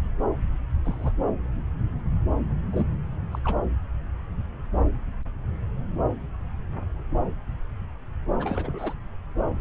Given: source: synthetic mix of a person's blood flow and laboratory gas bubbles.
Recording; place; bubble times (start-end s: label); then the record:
Doppler ultrasound of blood flow; subclavian vein
0.85-1.12 s: bubbles
2.71-2.88 s: bubbles
3.31-3.38 s: bubbles
3.44-3.57 s: bubbles
8.40-8.94 s: bubbles
From the record:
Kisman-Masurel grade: 221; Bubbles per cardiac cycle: several, 3 to 8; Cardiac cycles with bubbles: 10 to 50%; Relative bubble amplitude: barely perceptible (0.100 to 0.250); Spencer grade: 2 (many but less than half of the cardiac periods contain bubble signals, singularly or in groups); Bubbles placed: anywhere in the cardiac cycle